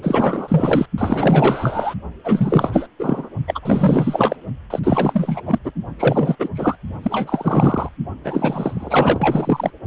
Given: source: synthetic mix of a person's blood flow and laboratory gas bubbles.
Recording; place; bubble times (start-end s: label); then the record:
Doppler ultrasound of blood flow; precordium
0.02-0.86 s: bubbles
0.97-1.95 s: bubbles
2.24-2.88 s: bubbles
2.99-3.29 s: bubbles
3.47-4.36 s: bubbles
4.70-4.79 s: bubbles
4.83-5.41 s: bubbles
5.46-5.58 s: bubbles
5.63-5.72 s: bubbles
5.99-6.36 s: bubbles
6.39-6.49 s: bubbles
6.54-6.77 s: bubbles
7.03-7.88 s: bubbles
8.24-9.71 s: bubbles
From the record:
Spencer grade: 4 (maximum detectable bubble signal sounding continuously throughout systole and diastole of every cardiac period, and overriding the amplitude of the normal cardiac signals); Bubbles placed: only in the low amplitude regions of the cardiac cycle